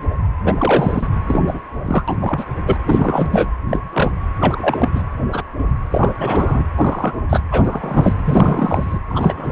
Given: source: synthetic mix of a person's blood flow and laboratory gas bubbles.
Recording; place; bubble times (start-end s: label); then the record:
Doppler ultrasound of blood flow; precordium
0.00-0.07 s: bubbles
0.45-0.54 s: bubbles
0.58-1.07 s: bubbles
1.26-1.64 s: bubbles
1.84-2.04 s: bubbles
2.08-2.17 s: bubbles
2.21-2.45 s: bubbles
2.64-2.77 s: bubbles
2.86-3.51 s: bubbles
3.69-3.80 s: bubbles
3.92-4.11 s: bubbles
4.39-4.90 s: bubbles
4.95-5.03 s: bubbles
5.31-5.42 s: bubbles
5.58-5.64 s: bubbles
5.91-6.13 s: bubbles
6.19-6.65 s: bubbles
6.78-7.13 s: bubbles
7.29-7.40 s: bubbles
7.51-8.13 s: bubbles
8.25-8.98 s: bubbles
9.06-9.52 s: bubbles
From the record:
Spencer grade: 3 (all of the cardiac periods contain showers or single bubble signals, but not dominating or overriding the cardiac motion signals); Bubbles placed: anywhere in the cardiac cycle